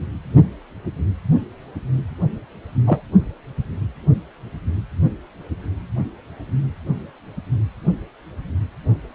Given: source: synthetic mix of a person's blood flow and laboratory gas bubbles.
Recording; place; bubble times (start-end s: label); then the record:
Doppler ultrasound of blood flow; precordium
2.86-3.01 s: bubbles
From the record:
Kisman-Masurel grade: 113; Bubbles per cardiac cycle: 1 to 2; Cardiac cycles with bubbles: 1 to 10%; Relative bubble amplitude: loud (0.450 to 0.775); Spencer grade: 1 (occasional bubble signal discernible with the cardiac motion signal, with majority of cardiac periods free of bubbles); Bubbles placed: only in the low amplitude regions of the cardiac cycle